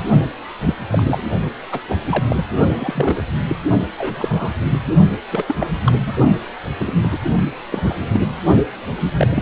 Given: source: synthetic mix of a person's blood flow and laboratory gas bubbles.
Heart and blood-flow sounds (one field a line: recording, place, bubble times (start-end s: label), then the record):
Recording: Doppler ultrasound of blood flow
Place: precordium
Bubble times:
0.66-0.75 s: bubbles
0.91-1.22 s: bubbles
1.72-1.80 s: bubbles
1.88-1.97 s: bubbles
2.05-2.23 s: bubbles
2.29-2.44 s: bubbles
2.78-3.22 s: bubbles
3.41-3.55 s: bubbles
3.98-4.54 s: bubbles
4.71-4.79 s: bubbles
5.31-5.44 s: bubbles
5.47-5.54 s: bubbles
5.60-5.67 s: bubbles
5.85-5.95 s: bubbles
6.06-6.12 s: bubbles
6.79-7.19 s: bubbles
7.70-7.95 s: bubbles
8.13-8.26 s: bubbles
9.04-9.11 s: bubbles
9.18-9.27 s: bubbles
9.34-9.42 s: bubbles
From the record:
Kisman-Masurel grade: 242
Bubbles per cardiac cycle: several, 3 to 8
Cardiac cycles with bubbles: 100%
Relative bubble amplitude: moderate (0.250 to 0.450)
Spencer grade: 3 (all of the cardiac periods contain showers or single bubble signals, but not dominating or overriding the cardiac motion signals)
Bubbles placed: only in the low amplitude regions of the cardiac cycle